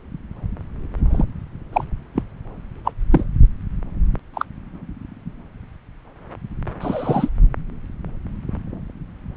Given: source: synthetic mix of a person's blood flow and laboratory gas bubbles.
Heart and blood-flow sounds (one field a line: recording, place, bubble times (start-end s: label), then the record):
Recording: Doppler ultrasound of blood flow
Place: subclavian vein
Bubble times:
1.10-1.26 s: bubbles
1.73-1.84 s: bubbles
2.15-2.22 s: bubbles
2.84-2.92 s: bubbles
3.10-3.24 s: bubbles
4.33-4.46 s: bubbles
6.81-7.29 s: bubbles
From the record:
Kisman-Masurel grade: 122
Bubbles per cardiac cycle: 1 to 2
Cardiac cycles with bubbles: 10 to 50%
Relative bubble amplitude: moderate (0.250 to 0.450)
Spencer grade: 2 (many but less than half of the cardiac periods contain bubble signals, singularly or in groups)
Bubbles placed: anywhere in the cardiac cycle